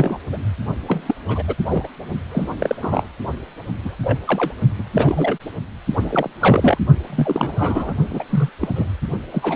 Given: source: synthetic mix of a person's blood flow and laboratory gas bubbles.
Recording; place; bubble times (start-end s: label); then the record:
Doppler ultrasound of blood flow; precordium
0.00-0.17 s: bubbles
0.33-0.38 s: bubbles
0.88-1.15 s: bubbles
1.28-1.43 s: bubbles
1.47-1.54 s: bubbles
1.69-1.89 s: bubbles
2.31-2.76 s: bubbles
2.81-3.06 s: bubbles
3.84-3.96 s: bubbles
4.03-4.18 s: bubbles
4.27-4.54 s: bubbles
4.79-4.83 s: bubbles
4.94-5.37 s: bubbles
6.01-6.30 s: bubbles
6.40-6.78 s: bubbles
7.10-7.94 s: bubbles
8.10-8.24 s: bubbles
8.29-8.49 s: bubbles
8.60-8.69 s: bubbles
8.75-8.88 s: bubbles
9.31-9.56 s: bubbles
From the record:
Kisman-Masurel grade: 242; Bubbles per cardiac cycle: several, 3 to 8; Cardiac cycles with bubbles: 100%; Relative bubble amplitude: moderate (0.250 to 0.450); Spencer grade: 3 (all of the cardiac periods contain showers or single bubble signals, but not dominating or overriding the cardiac motion signals); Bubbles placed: only in the low amplitude regions of the cardiac cycle